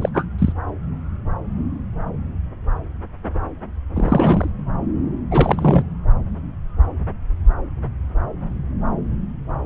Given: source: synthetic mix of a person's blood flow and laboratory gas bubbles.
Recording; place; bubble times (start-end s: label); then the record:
Doppler ultrasound of blood flow; subclavian vein
0.01-0.09 s: bubbles
0.14-0.25 s: bubbles
0.38-0.52 s: bubbles
3.94-4.50 s: bubbles
5.31-5.83 s: bubbles
From the record:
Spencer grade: 2 (many but less than half of the cardiac periods contain bubble signals, singularly or in groups); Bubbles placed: anywhere in the cardiac cycle